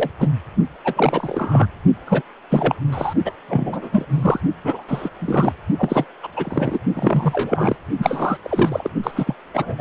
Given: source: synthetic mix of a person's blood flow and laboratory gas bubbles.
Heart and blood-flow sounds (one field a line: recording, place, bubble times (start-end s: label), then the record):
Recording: Doppler ultrasound of blood flow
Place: precordium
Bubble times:
0.00-0.10 s: bubbles
0.18-0.29 s: bubbles
0.84-1.66 s: bubbles
2.05-2.22 s: bubbles
2.50-2.75 s: bubbles
2.92-3.13 s: bubbles
3.25-3.32 s: bubbles
3.48-3.89 s: bubbles
3.92-4.07 s: bubbles
4.10-4.41 s: bubbles
4.64-4.83 s: bubbles
4.88-5.09 s: bubbles
5.20-5.53 s: bubbles
5.78-6.05 s: bubbles
6.23-6.29 s: bubbles
6.36-6.79 s: bubbles
6.96-7.76 s: bubbles
7.98-8.38 s: bubbles
8.43-8.91 s: bubbles
9.03-9.11 s: bubbles
9.15-9.35 s: bubbles
9.54-9.75 s: bubbles
9.78-9.81 s: bubbles
From the record:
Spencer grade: 3 (all of the cardiac periods contain showers or single bubble signals, but not dominating or overriding the cardiac motion signals)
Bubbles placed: only in the low amplitude regions of the cardiac cycle